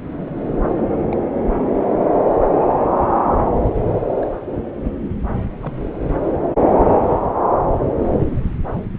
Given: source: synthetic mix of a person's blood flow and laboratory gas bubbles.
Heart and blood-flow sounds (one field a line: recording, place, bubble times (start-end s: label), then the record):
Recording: Doppler ultrasound of blood flow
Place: subclavian vein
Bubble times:
0.77-0.82 s: bubbles
1.11-1.16 s: bubbles
4.19-4.27 s: bubbles
4.84-4.91 s: bubbles
5.35-5.72 s: bubbles
From the record:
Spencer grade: 2 (many but less than half of the cardiac periods contain bubble signals, singularly or in groups)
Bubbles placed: anywhere in the cardiac cycle